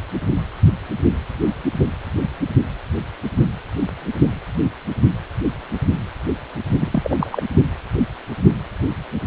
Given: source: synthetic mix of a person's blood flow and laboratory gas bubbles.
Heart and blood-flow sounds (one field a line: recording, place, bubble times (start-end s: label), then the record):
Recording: Doppler ultrasound of blood flow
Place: precordium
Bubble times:
6.80-7.42 s: bubbles
From the record:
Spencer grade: 1 (occasional bubble signal discernible with the cardiac motion signal, with majority of cardiac periods free of bubbles)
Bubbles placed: only in the low amplitude regions of the cardiac cycle